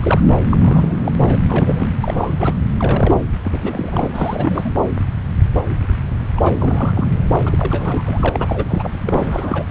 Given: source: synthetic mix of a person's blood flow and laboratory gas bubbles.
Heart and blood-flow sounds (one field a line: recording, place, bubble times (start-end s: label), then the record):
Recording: Doppler ultrasound of blood flow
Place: subclavian vein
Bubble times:
0.00-0.20 s: bubbles
0.49-1.14 s: bubbles
1.17-1.38 s: bubbles
1.49-1.88 s: bubbles
2.00-2.54 s: bubbles
2.77-3.18 s: bubbles
3.44-4.72 s: bubbles
6.37-7.11 s: bubbles
7.30-7.40 s: bubbles
7.45-8.29 s: bubbles
8.33-8.91 s: bubbles
9.05-9.65 s: bubbles
From the record:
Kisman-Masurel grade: 332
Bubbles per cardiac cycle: rolling drumbeat, 9 or more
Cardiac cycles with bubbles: 50 to 99%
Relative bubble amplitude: moderate (0.250 to 0.450)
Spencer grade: 3 (all of the cardiac periods contain showers or single bubble signals, but not dominating or overriding the cardiac motion signals)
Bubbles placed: anywhere in the cardiac cycle